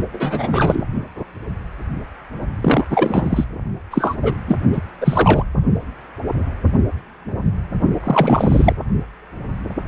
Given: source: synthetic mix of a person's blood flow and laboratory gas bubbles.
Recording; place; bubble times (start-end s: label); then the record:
Doppler ultrasound of blood flow; precordium
0.13-0.82 s: bubbles
2.62-2.85 s: bubbles
2.90-3.46 s: bubbles
3.91-4.16 s: bubbles
4.22-4.34 s: bubbles
4.47-4.56 s: bubbles
4.72-4.80 s: bubbles
5.01-5.43 s: bubbles
8.04-8.73 s: bubbles
From the record:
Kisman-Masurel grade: 233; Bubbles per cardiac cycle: several, 3 to 8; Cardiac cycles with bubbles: 50 to 99%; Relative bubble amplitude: loud (0.450 to 0.775); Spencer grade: 3 (all of the cardiac periods contain showers or single bubble signals, but not dominating or overriding the cardiac motion signals); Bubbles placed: only in the low amplitude regions of the cardiac cycle